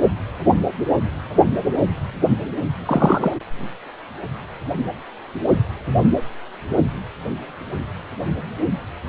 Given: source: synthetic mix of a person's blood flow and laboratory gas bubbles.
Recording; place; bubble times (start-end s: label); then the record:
Doppler ultrasound of blood flow; precordium
2.85-3.34 s: bubbles
From the record:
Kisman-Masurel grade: 213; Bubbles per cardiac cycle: several, 3 to 8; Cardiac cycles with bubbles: 1 to 10%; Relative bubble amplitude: loud (0.450 to 0.775); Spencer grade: 1 (occasional bubble signal discernible with the cardiac motion signal, with majority of cardiac periods free of bubbles); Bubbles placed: anywhere in the cardiac cycle